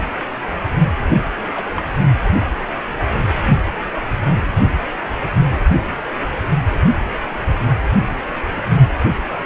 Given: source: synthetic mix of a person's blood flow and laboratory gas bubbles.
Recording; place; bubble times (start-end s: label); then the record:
Doppler ultrasound of blood flow; precordium
1.18-1.22 s: bubbles
1.54-1.82 s: bubbles
From the record:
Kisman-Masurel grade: 211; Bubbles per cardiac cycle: several, 3 to 8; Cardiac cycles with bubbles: 1 to 10%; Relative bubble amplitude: barely perceptible (0.100 to 0.250); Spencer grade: 1 (occasional bubble signal discernible with the cardiac motion signal, with majority of cardiac periods free of bubbles); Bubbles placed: anywhere in the cardiac cycle